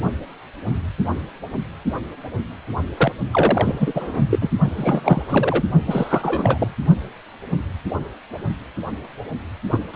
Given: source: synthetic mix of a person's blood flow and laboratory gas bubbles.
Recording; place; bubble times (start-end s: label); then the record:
Doppler ultrasound of blood flow; precordium
2.97-3.12 s: bubbles
3.31-4.26 s: bubbles
4.30-4.39 s: bubbles
4.42-4.50 s: bubbles
4.67-5.62 s: bubbles
5.87-6.68 s: bubbles
9.70-9.79 s: bubbles
9.94-9.96 s: bubbles
From the record:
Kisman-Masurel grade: 332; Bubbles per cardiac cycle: rolling drumbeat, 9 or more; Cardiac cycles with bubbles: 50 to 99%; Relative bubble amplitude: moderate (0.250 to 0.450); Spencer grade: 3 (all of the cardiac periods contain showers or single bubble signals, but not dominating or overriding the cardiac motion signals); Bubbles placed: only in the low amplitude regions of the cardiac cycle